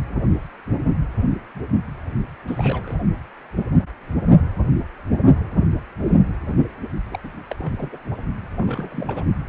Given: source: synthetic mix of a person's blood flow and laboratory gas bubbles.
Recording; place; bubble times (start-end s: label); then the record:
Doppler ultrasound of blood flow; precordium
2.47-2.96 s: bubbles
7.11-7.19 s: bubbles
7.24-7.30 s: bubbles
7.50-7.90 s: bubbles
7.92-7.98 s: bubbles
8.58-9.23 s: bubbles
From the record:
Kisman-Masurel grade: 221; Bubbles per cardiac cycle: several, 3 to 8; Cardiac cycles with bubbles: 10 to 50%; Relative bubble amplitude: barely perceptible (0.100 to 0.250); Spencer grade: 2 (many but less than half of the cardiac periods contain bubble signals, singularly or in groups); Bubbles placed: only in the low amplitude regions of the cardiac cycle